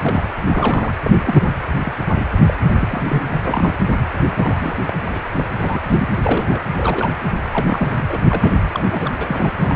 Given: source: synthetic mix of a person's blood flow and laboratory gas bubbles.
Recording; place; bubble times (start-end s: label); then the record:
Doppler ultrasound of blood flow; precordium
0.00-0.24 s: bubbles
0.46-0.93 s: bubbles
1.02-1.51 s: bubbles
1.84-1.92 s: bubbles
2.15-2.25 s: bubbles
2.46-2.54 s: bubbles
2.80-3.02 s: bubbles
3.09-3.42 s: bubbles
3.45-3.73 s: bubbles
4.37-4.75 s: bubbles
4.87-4.96 s: bubbles
5.04-5.21 s: bubbles
5.37-5.44 s: bubbles
5.61-5.79 s: bubbles
5.86-6.09 s: bubbles
6.23-6.62 s: bubbles
6.77-7.11 s: bubbles
7.52-7.88 s: bubbles
7.91-8.06 s: bubbles
8.09-8.18 s: bubbles
8.29-8.58 s: bubbles
8.69-9.13 s: bubbles
9.21-9.52 s: bubbles
9.62-9.76 s: bubbles
From the record:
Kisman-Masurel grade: 242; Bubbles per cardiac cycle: several, 3 to 8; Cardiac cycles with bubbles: 100%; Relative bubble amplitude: moderate (0.250 to 0.450); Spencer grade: 3 (all of the cardiac periods contain showers or single bubble signals, but not dominating or overriding the cardiac motion signals); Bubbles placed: anywhere in the cardiac cycle